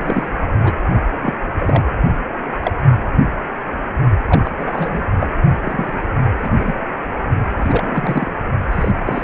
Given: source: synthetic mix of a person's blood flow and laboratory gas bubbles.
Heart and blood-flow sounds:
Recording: Doppler ultrasound of blood flow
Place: precordium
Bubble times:
0.00-0.29 s: bubbles
0.64-0.73 s: bubbles
1.23-1.34 s: bubbles
1.59-1.83 s: bubbles
2.63-2.72 s: bubbles
4.28-4.51 s: bubbles
4.58-5.02 s: bubbles
5.19-5.27 s: bubbles
5.64-6.08 s: bubbles
6.35-6.49 s: bubbles
6.59-6.75 s: bubbles
7.56-8.31 s: bubbles
8.71-8.91 s: bubbles
9.05-9.24 s: bubbles
From the record:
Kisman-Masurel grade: 232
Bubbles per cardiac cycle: several, 3 to 8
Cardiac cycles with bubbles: 50 to 99%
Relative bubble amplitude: moderate (0.250 to 0.450)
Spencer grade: 3 (all of the cardiac periods contain showers or single bubble signals, but not dominating or overriding the cardiac motion signals)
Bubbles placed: only in the low amplitude regions of the cardiac cycle

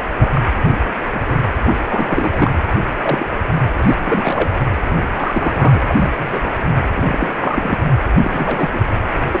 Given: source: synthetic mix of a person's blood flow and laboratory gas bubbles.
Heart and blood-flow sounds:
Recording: Doppler ultrasound of blood flow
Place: precordium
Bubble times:
0.20-0.31 s: bubbles
0.34-0.42 s: bubbles
0.69-0.75 s: bubbles
1.14-1.21 s: bubbles
1.27-1.40 s: bubbles
1.65-1.74 s: bubbles
1.89-2.50 s: bubbles
3.02-3.26 s: bubbles
3.79-3.95 s: bubbles
4.03-4.50 s: bubbles
4.90-5.10 s: bubbles
5.15-5.81 s: bubbles
5.88-6.12 s: bubbles
6.17-6.52 s: bubbles
6.94-7.34 s: bubbles
7.39-7.77 s: bubbles
8.17-8.80 s: bubbles
9.31-9.40 s: bubbles
From the record:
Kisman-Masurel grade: 242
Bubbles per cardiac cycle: several, 3 to 8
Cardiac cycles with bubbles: 100%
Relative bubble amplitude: moderate (0.250 to 0.450)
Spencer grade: 3 (all of the cardiac periods contain showers or single bubble signals, but not dominating or overriding the cardiac motion signals)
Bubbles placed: anywhere in the cardiac cycle

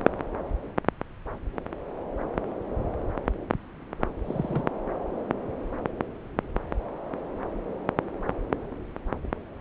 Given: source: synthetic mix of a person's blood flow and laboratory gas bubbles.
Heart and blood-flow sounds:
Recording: Doppler ultrasound of blood flow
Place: subclavian vein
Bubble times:
4.25-4.68 s: bubbles
From the record:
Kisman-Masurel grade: 111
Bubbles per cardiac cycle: 1 to 2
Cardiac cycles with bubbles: 1 to 10%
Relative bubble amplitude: barely perceptible (0.100 to 0.250)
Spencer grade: 1 (occasional bubble signal discernible with the cardiac motion signal, with majority of cardiac periods free of bubbles)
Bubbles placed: anywhere in the cardiac cycle

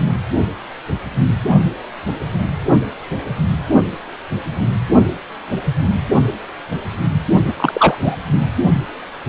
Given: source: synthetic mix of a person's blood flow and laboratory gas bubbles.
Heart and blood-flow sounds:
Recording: Doppler ultrasound of blood flow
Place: precordium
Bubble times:
7.47-7.54 s: bubbles
7.57-8.15 s: bubbles
From the record:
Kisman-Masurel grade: 213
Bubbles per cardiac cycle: several, 3 to 8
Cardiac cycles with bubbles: 1 to 10%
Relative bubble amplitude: loud (0.450 to 0.775)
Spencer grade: 1 (occasional bubble signal discernible with the cardiac motion signal, with majority of cardiac periods free of bubbles)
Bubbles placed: anywhere in the cardiac cycle

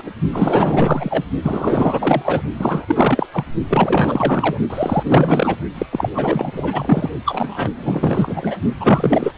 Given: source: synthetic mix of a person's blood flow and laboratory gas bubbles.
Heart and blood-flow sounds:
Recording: Doppler ultrasound of blood flow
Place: precordium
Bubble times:
0.00-0.02 s: bubbles
0.06-0.11 s: bubbles
0.32-1.24 s: bubbles
1.43-2.42 s: bubbles
2.58-3.27 s: bubbles
3.31-3.45 s: bubbles
3.69-4.58 s: bubbles
4.70-5.56 s: bubbles
5.74-5.86 s: bubbles
5.92-6.09 s: bubbles
6.13-7.09 s: bubbles
7.25-7.69 s: bubbles
7.78-8.58 s: bubbles
8.80-9.32 s: bubbles
From the record:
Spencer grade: 4 (maximum detectable bubble signal sounding continuously throughout systole and diastole of every cardiac period, and overriding the amplitude of the normal cardiac signals)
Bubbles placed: only in the low amplitude regions of the cardiac cycle

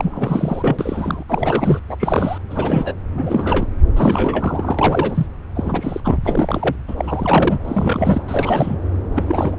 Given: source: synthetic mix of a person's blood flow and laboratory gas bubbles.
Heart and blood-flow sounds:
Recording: Doppler ultrasound of blood flow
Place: subclavian vein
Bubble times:
0.00-0.76 s: bubbles
0.79-1.23 s: bubbles
1.29-1.79 s: bubbles
1.88-2.38 s: bubbles
2.50-2.92 s: bubbles
3.15-3.66 s: bubbles
3.96-5.26 s: bubbles
5.54-6.00 s: bubbles
6.04-6.17 s: bubbles
6.22-6.75 s: bubbles
6.88-7.58 s: bubbles
7.64-8.23 s: bubbles
8.28-8.78 s: bubbles
9.15-9.59 s: bubbles
From the record:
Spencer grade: 3 (all of the cardiac periods contain showers or single bubble signals, but not dominating or overriding the cardiac motion signals)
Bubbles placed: anywhere in the cardiac cycle

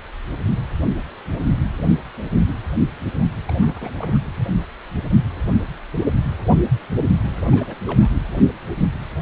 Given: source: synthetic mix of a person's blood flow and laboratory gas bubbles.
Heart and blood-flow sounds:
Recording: Doppler ultrasound of blood flow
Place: precordium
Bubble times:
3.45-3.91 s: bubbles
3.96-4.19 s: bubbles
7.42-7.50 s: bubbles
7.52-7.75 s: bubbles
7.87-8.10 s: bubbles
From the record:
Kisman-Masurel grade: 221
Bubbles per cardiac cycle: several, 3 to 8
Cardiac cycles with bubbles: 10 to 50%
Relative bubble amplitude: barely perceptible (0.100 to 0.250)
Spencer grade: 2 (many but less than half of the cardiac periods contain bubble signals, singularly or in groups)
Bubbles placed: anywhere in the cardiac cycle

